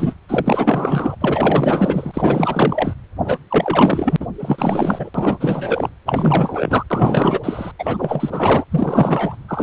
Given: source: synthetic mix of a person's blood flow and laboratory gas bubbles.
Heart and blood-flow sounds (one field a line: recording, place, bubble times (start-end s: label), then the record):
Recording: Doppler ultrasound of blood flow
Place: precordium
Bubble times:
0.00-0.14 s: bubbles
0.28-1.16 s: bubbles
1.21-2.94 s: bubbles
3.24-3.39 s: bubbles
3.50-4.17 s: bubbles
4.20-4.27 s: bubbles
4.39-5.09 s: bubbles
5.14-5.89 s: bubbles
6.05-6.84 s: bubbles
6.90-7.40 s: bubbles
7.43-7.71 s: bubbles
7.79-8.65 s: bubbles
8.71-9.37 s: bubbles
9.48-9.63 s: bubbles
From the record:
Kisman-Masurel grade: 444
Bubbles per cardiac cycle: continuous sound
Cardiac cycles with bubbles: 100%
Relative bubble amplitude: maximal (0.775 to 0.999)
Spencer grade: 4 (maximum detectable bubble signal sounding continuously throughout systole and diastole of every cardiac period, and overriding the amplitude of the normal cardiac signals)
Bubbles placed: anywhere in the cardiac cycle